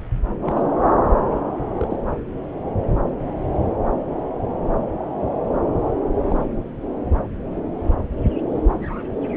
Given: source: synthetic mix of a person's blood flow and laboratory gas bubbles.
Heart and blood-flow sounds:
Doppler ultrasound of blood flow; subclavian vein
0.41-0.62 s: bubbles
1.79-1.97 s: bubbles
6.30-6.36 s: bubbles
6.39-6.44 s: bubbles
From the record:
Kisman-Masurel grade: 121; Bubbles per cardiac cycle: 1 to 2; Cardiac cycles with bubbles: 10 to 50%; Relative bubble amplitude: barely perceptible (0.100 to 0.250); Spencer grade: 2 (many but less than half of the cardiac periods contain bubble signals, singularly or in groups); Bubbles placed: anywhere in the cardiac cycle

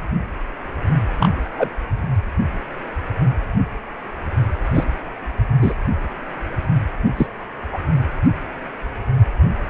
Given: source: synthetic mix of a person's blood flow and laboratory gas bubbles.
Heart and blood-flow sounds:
Doppler ultrasound of blood flow; precordium
1.19-1.29 s: bubbles
1.58-1.70 s: bubbles
4.74-4.84 s: bubbles
5.62-5.73 s: bubbles
7.17-7.26 s: bubbles
7.72-7.79 s: bubbles
From the record:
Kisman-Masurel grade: 123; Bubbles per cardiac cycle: 1 to 2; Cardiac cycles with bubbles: 10 to 50%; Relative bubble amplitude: loud (0.450 to 0.775); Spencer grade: 2 (many but less than half of the cardiac periods contain bubble signals, singularly or in groups); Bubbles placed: anywhere in the cardiac cycle

